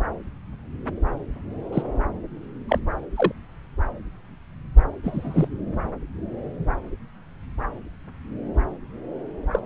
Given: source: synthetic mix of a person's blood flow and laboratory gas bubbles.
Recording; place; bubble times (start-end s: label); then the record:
Doppler ultrasound of blood flow; subclavian vein
1.73-1.82 s: bubbles
2.69-2.79 s: bubbles
3.16-3.32 s: bubbles
5.04-5.48 s: bubbles
9.53-9.59 s: bubbles
From the record:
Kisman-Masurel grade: 122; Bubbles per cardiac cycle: 1 to 2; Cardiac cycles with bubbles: 10 to 50%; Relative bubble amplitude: moderate (0.250 to 0.450); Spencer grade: 2 (many but less than half of the cardiac periods contain bubble signals, singularly or in groups); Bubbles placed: anywhere in the cardiac cycle